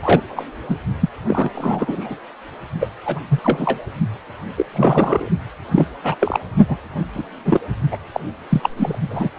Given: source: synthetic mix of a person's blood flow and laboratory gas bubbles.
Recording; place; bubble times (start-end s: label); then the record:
Doppler ultrasound of blood flow; precordium
0.02-0.22 s: bubbles
0.36-0.45 s: bubbles
0.69-0.76 s: bubbles
0.99-1.09 s: bubbles
1.28-1.50 s: bubbles
1.54-2.17 s: bubbles
2.80-2.90 s: bubbles
3.05-3.20 s: bubbles
3.29-3.40 s: bubbles
3.43-3.79 s: bubbles
4.57-4.65 s: bubbles
4.73-5.28 s: bubbles
5.71-5.86 s: bubbles
6.03-6.15 s: bubbles
6.20-6.38 s: bubbles
6.68-6.77 s: bubbles
7.14-7.22 s: bubbles
7.44-7.60 s: bubbles
7.91-7.97 s: bubbles
8.12-8.20 s: bubbles
8.49-8.70 s: bubbles
8.76-8.99 s: bubbles
9.10-9.29 s: bubbles
From the record:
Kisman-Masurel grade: 243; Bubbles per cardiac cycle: several, 3 to 8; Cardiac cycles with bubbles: 100%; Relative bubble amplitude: loud (0.450 to 0.775); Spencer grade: 3 (all of the cardiac periods contain showers or single bubble signals, but not dominating or overriding the cardiac motion signals); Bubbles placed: only in the low amplitude regions of the cardiac cycle